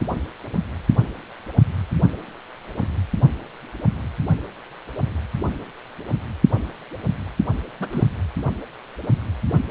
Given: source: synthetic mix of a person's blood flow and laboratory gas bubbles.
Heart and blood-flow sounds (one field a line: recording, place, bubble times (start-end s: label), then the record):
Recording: Doppler ultrasound of blood flow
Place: precordium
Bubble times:
7.80-7.89 s: bubbles
7.92-8.04 s: bubbles
From the record:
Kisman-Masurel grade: 112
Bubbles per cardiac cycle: 1 to 2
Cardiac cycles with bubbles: 1 to 10%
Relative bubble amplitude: moderate (0.250 to 0.450)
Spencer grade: 1 (occasional bubble signal discernible with the cardiac motion signal, with majority of cardiac periods free of bubbles)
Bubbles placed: anywhere in the cardiac cycle